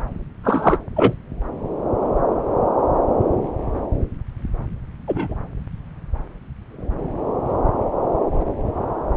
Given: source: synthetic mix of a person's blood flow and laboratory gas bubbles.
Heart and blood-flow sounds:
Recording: Doppler ultrasound of blood flow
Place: subclavian vein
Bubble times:
0.43-0.78 s: bubbles
0.95-1.13 s: bubbles
5.07-5.35 s: bubbles
From the record:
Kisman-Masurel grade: 123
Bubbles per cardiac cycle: 1 to 2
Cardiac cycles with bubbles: 10 to 50%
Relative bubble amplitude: loud (0.450 to 0.775)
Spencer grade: 2 (many but less than half of the cardiac periods contain bubble signals, singularly or in groups)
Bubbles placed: anywhere in the cardiac cycle

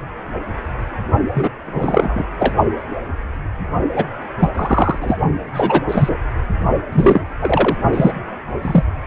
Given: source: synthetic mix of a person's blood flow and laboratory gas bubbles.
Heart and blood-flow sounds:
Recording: Doppler ultrasound of blood flow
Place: precordium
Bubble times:
1.33-1.49 s: bubbles
1.66-2.25 s: bubbles
2.38-2.54 s: bubbles
3.96-4.04 s: bubbles
4.40-4.52 s: bubbles
4.54-5.18 s: bubbles
5.54-5.83 s: bubbles
5.89-6.17 s: bubbles
6.92-7.21 s: bubbles
7.41-7.77 s: bubbles
7.93-8.13 s: bubbles
8.62-8.84 s: bubbles
From the record:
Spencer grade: 3 (all of the cardiac periods contain showers or single bubble signals, but not dominating or overriding the cardiac motion signals)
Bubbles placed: only in the low amplitude regions of the cardiac cycle

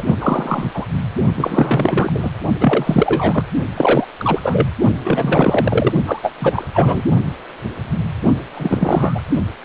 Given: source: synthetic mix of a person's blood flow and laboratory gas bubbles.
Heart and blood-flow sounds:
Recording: Doppler ultrasound of blood flow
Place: precordium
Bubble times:
0.00-0.15 s: bubbles
0.20-0.69 s: bubbles
0.74-0.85 s: bubbles
1.36-2.30 s: bubbles
2.60-3.42 s: bubbles
3.77-4.04 s: bubbles
4.17-4.39 s: bubbles
4.42-4.66 s: bubbles
5.04-5.92 s: bubbles
6.06-6.19 s: bubbles
6.22-6.33 s: bubbles
6.39-6.67 s: bubbles
6.74-7.03 s: bubbles
8.55-9.22 s: bubbles
From the record:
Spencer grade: 3 (all of the cardiac periods contain showers or single bubble signals, but not dominating or overriding the cardiac motion signals)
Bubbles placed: only in the low amplitude regions of the cardiac cycle

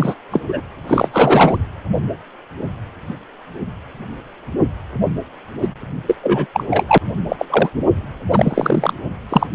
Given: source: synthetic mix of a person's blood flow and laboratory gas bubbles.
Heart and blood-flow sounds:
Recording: Doppler ultrasound of blood flow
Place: precordium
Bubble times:
0.00-0.15 s: bubbles
0.31-0.41 s: bubbles
0.48-0.60 s: bubbles
0.88-1.08 s: bubbles
1.12-1.58 s: bubbles
5.62-5.68 s: bubbles
6.07-6.16 s: bubbles
6.23-6.46 s: bubbles
6.53-6.64 s: bubbles
6.70-6.98 s: bubbles
7.29-7.46 s: bubbles
7.50-7.70 s: bubbles
8.31-8.94 s: bubbles
9.29-9.47 s: bubbles
9.53-9.55 s: bubbles
From the record:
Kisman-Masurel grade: 233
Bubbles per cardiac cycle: several, 3 to 8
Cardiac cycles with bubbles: 50 to 99%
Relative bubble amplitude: loud (0.450 to 0.775)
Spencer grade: 3 (all of the cardiac periods contain showers or single bubble signals, but not dominating or overriding the cardiac motion signals)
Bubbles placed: anywhere in the cardiac cycle

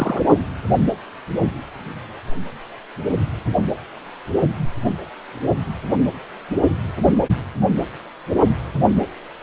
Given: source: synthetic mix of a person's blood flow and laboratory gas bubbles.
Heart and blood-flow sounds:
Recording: Doppler ultrasound of blood flow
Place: precordium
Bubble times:
0.00-0.21 s: bubbles
From the record:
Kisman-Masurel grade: 112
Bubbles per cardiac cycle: 1 to 2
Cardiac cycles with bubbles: 1 to 10%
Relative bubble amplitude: moderate (0.250 to 0.450)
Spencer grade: 1 (occasional bubble signal discernible with the cardiac motion signal, with majority of cardiac periods free of bubbles)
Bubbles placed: only in the low amplitude regions of the cardiac cycle

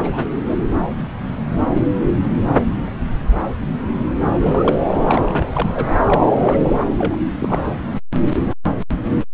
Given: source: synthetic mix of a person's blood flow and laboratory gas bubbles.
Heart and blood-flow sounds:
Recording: Doppler ultrasound of blood flow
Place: subclavian vein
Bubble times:
0.03-0.25 s: bubbles
0.44-0.56 s: bubbles
4.21-4.79 s: bubbles
5.07-5.45 s: bubbles
5.53-5.88 s: bubbles
6.05-6.31 s: bubbles
6.35-6.87 s: bubbles
6.98-7.16 s: bubbles
7.40-7.71 s: bubbles
From the record:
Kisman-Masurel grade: 232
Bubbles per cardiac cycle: several, 3 to 8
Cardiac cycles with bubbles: 50 to 99%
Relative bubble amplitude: moderate (0.250 to 0.450)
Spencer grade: 3 (all of the cardiac periods contain showers or single bubble signals, but not dominating or overriding the cardiac motion signals)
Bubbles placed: anywhere in the cardiac cycle

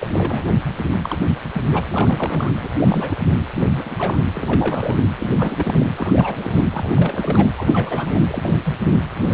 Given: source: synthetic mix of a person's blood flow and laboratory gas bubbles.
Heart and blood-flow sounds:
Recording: Doppler ultrasound of blood flow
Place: precordium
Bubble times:
0.00-0.44 s: bubbles
0.94-1.17 s: bubbles
1.53-1.62 s: bubbles
1.71-1.81 s: bubbles
1.86-2.55 s: bubbles
2.61-2.69 s: bubbles
2.73-3.33 s: bubbles
3.54-3.66 s: bubbles
3.71-4.20 s: bubbles
4.34-4.96 s: bubbles
5.18-5.33 s: bubbles
5.37-5.86 s: bubbles
5.95-6.67 s: bubbles
6.73-7.47 s: bubbles
7.57-8.20 s: bubbles
8.28-8.75 s: bubbles
8.92-9.00 s: bubbles
9.29-9.34 s: bubbles
From the record:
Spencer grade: 3 (all of the cardiac periods contain showers or single bubble signals, but not dominating or overriding the cardiac motion signals)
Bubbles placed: anywhere in the cardiac cycle

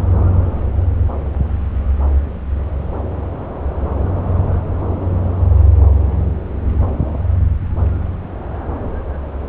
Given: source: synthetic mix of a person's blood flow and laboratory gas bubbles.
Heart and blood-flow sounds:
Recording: Doppler ultrasound of blood flow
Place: subclavian vein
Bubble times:
no bubbles
From the record:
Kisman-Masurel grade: 000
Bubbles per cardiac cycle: 0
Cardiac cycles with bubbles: 0%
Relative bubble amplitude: no bubbles discernible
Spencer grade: 0 (complete lack of bubble signals)

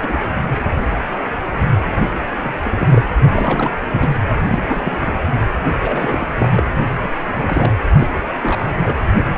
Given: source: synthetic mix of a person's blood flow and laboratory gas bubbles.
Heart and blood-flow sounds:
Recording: Doppler ultrasound of blood flow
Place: precordium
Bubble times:
0.00-0.23 s: bubbles
1.90-2.10 s: bubbles
2.39-2.58 s: bubbles
2.63-3.10 s: bubbles
3.24-3.80 s: bubbles
3.90-4.14 s: bubbles
4.37-5.19 s: bubbles
5.64-5.73 s: bubbles
5.81-6.30 s: bubbles
6.38-6.63 s: bubbles
7.02-7.09 s: bubbles
7.34-7.72 s: bubbles
7.98-8.07 s: bubbles
8.13-8.36 s: bubbles
8.42-8.76 s: bubbles
8.82-8.97 s: bubbles
From the record:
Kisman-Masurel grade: 232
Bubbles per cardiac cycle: several, 3 to 8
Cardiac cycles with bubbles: 50 to 99%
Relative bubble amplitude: moderate (0.250 to 0.450)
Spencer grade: 3 (all of the cardiac periods contain showers or single bubble signals, but not dominating or overriding the cardiac motion signals)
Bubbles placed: anywhere in the cardiac cycle

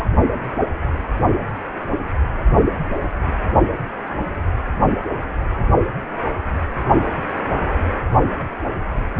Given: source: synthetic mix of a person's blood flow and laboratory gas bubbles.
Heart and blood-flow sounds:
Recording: Doppler ultrasound of blood flow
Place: precordium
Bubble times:
0.00-0.05 s: bubbles
From the record:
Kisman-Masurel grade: 113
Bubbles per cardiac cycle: 1 to 2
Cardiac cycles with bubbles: 1 to 10%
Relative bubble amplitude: loud (0.450 to 0.775)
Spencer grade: 1 (occasional bubble signal discernible with the cardiac motion signal, with majority of cardiac periods free of bubbles)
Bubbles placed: only in the low amplitude regions of the cardiac cycle

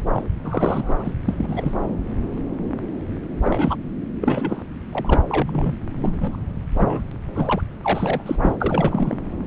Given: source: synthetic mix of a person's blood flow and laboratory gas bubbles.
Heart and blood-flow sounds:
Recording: Doppler ultrasound of blood flow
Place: subclavian vein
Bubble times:
0.00-0.02 s: bubbles
0.14-0.22 s: bubbles
0.44-1.12 s: bubbles
1.27-1.35 s: bubbles
1.38-1.74 s: bubbles
3.44-3.75 s: bubbles
4.21-4.63 s: bubbles
4.92-5.22 s: bubbles
5.28-5.72 s: bubbles
5.97-6.37 s: bubbles
6.75-7.01 s: bubbles
7.11-7.16 s: bubbles
7.26-7.62 s: bubbles
7.82-8.36 s: bubbles
8.41-8.56 s: bubbles
8.61-9.17 s: bubbles
From the record:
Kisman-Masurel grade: 232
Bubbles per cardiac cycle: several, 3 to 8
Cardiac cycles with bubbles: 50 to 99%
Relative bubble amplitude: moderate (0.250 to 0.450)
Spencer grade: 3 (all of the cardiac periods contain showers or single bubble signals, but not dominating or overriding the cardiac motion signals)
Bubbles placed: anywhere in the cardiac cycle

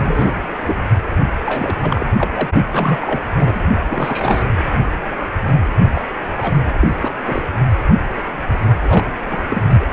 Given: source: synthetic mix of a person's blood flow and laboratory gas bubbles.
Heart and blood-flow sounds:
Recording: Doppler ultrasound of blood flow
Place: precordium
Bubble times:
0.00-0.34 s: bubbles
0.66-0.80 s: bubbles
1.45-1.75 s: bubbles
1.82-2.04 s: bubbles
2.18-2.31 s: bubbles
2.34-2.49 s: bubbles
2.72-3.24 s: bubbles
3.32-3.61 s: bubbles
3.87-4.44 s: bubbles
5.94-6.02 s: bubbles
6.29-6.60 s: bubbles
6.80-6.88 s: bubbles
7.00-7.11 s: bubbles
7.26-7.42 s: bubbles
8.82-9.06 s: bubbles
9.31-9.43 s: bubbles
9.49-9.62 s: bubbles
9.69-9.89 s: bubbles
From the record:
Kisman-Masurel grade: 332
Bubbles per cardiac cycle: rolling drumbeat, 9 or more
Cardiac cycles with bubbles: 50 to 99%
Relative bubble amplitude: moderate (0.250 to 0.450)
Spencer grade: 3 (all of the cardiac periods contain showers or single bubble signals, but not dominating or overriding the cardiac motion signals)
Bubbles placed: only in the low amplitude regions of the cardiac cycle

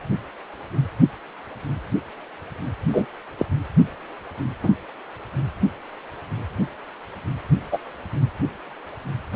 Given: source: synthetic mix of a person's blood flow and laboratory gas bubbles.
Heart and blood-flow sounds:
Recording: Doppler ultrasound of blood flow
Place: precordium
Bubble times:
2.92-3.05 s: bubbles
3.38-3.46 s: bubbles
4.62-4.72 s: bubbles
7.72-7.78 s: bubbles
9.32-9.36 s: bubbles
From the record:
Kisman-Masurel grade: 122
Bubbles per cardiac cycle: 1 to 2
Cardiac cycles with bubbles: 10 to 50%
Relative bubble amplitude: moderate (0.250 to 0.450)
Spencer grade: 2 (many but less than half of the cardiac periods contain bubble signals, singularly or in groups)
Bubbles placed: anywhere in the cardiac cycle

